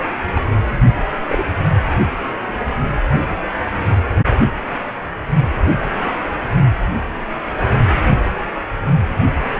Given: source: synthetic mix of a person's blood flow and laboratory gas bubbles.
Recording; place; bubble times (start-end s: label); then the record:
Doppler ultrasound of blood flow; precordium
0.33-0.43 s: bubbles
0.95-1.03 s: bubbles
1.28-1.45 s: bubbles
From the record:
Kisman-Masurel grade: 122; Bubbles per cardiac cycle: 1 to 2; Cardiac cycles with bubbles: 10 to 50%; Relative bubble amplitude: moderate (0.250 to 0.450); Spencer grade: 2 (many but less than half of the cardiac periods contain bubble signals, singularly or in groups); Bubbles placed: only in the low amplitude regions of the cardiac cycle